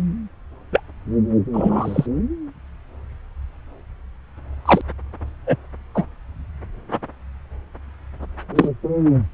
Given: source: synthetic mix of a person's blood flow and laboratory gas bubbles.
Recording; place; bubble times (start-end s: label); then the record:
Doppler ultrasound of blood flow; subclavian vein
0.72-0.80 s: bubbles
1.53-2.06 s: bubbles
4.65-4.81 s: bubbles
5.46-5.56 s: bubbles
5.94-6.06 s: bubbles
8.55-8.69 s: bubbles
From the record:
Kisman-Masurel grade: 123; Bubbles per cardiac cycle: 1 to 2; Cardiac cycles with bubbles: 10 to 50%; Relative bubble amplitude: loud (0.450 to 0.775); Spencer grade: 2 (many but less than half of the cardiac periods contain bubble signals, singularly or in groups); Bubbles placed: anywhere in the cardiac cycle